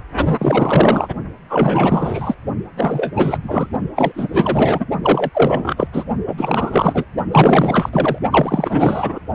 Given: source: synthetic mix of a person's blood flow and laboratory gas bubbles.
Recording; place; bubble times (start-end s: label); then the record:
Doppler ultrasound of blood flow; precordium
0.38-1.08 s: bubbles
1.50-2.34 s: bubbles
2.76-3.38 s: bubbles
3.42-3.71 s: bubbles
3.95-4.86 s: bubbles
5.03-5.29 s: bubbles
5.34-5.88 s: bubbles
5.92-6.04 s: bubbles
6.27-6.35 s: bubbles
6.37-7.04 s: bubbles
7.31-7.90 s: bubbles
7.92-8.18 s: bubbles
8.31-9.19 s: bubbles
From the record:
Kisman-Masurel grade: 444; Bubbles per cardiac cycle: continuous sound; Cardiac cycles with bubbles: 100%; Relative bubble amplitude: maximal (0.775 to 0.999); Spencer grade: 4 (maximum detectable bubble signal sounding continuously throughout systole and diastole of every cardiac period, and overriding the amplitude of the normal cardiac signals); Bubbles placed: only in the low amplitude regions of the cardiac cycle